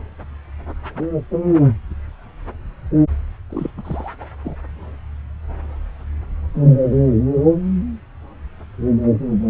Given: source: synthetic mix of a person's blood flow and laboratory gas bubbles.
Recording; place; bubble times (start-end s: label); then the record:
Doppler ultrasound of blood flow; subclavian vein
3.50-3.71 s: bubbles
3.77-4.13 s: bubbles
4.21-4.25 s: bubbles
4.44-4.55 s: bubbles
From the record:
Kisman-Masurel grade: 221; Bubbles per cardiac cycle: several, 3 to 8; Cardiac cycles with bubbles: 10 to 50%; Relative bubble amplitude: barely perceptible (0.100 to 0.250); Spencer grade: 2 (many but less than half of the cardiac periods contain bubble signals, singularly or in groups); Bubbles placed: anywhere in the cardiac cycle